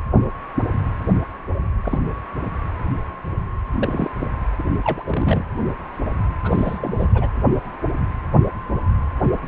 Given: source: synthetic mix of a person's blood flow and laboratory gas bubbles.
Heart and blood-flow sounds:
Doppler ultrasound of blood flow; precordium
1.83-1.99 s: bubbles
2.44-2.51 s: bubbles
3.74-4.10 s: bubbles
4.20-4.29 s: bubbles
4.58-4.63 s: bubbles
4.83-5.45 s: bubbles
6.43-7.28 s: bubbles
From the record:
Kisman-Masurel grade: 222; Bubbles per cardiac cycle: several, 3 to 8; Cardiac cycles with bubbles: 10 to 50%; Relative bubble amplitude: moderate (0.250 to 0.450); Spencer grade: 2 (many but less than half of the cardiac periods contain bubble signals, singularly or in groups); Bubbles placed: anywhere in the cardiac cycle

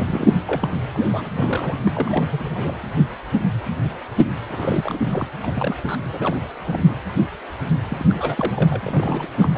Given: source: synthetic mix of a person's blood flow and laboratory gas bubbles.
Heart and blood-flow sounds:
Doppler ultrasound of blood flow; precordium
0.00-0.35 s: bubbles
0.47-0.70 s: bubbles
0.93-1.31 s: bubbles
1.37-1.76 s: bubbles
1.85-2.29 s: bubbles
2.31-2.51 s: bubbles
2.54-2.75 s: bubbles
4.50-5.00 s: bubbles
5.09-5.29 s: bubbles
5.43-5.98 s: bubbles
6.12-6.48 s: bubbles
6.61-6.96 s: bubbles
7.90-8.05 s: bubbles
8.09-8.80 s: bubbles
8.85-9.29 s: bubbles
9.37-9.50 s: bubbles
9.54-9.58 s: bubbles
From the record:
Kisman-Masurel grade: 332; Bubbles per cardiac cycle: rolling drumbeat, 9 or more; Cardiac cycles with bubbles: 50 to 99%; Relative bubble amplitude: moderate (0.250 to 0.450); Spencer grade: 3 (all of the cardiac periods contain showers or single bubble signals, but not dominating or overriding the cardiac motion signals); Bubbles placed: anywhere in the cardiac cycle

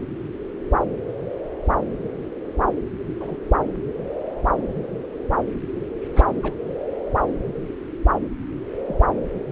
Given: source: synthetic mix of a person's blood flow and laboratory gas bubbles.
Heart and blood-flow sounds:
Doppler ultrasound of blood flow; subclavian vein
3.20-3.37 s: bubbles
6.16-6.25 s: bubbles
6.42-6.53 s: bubbles
8.88-8.99 s: bubbles
From the record:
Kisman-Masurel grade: 121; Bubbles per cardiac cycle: 1 to 2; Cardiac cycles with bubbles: 10 to 50%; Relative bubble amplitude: barely perceptible (0.100 to 0.250); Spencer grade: 2 (many but less than half of the cardiac periods contain bubble signals, singularly or in groups); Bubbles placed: anywhere in the cardiac cycle

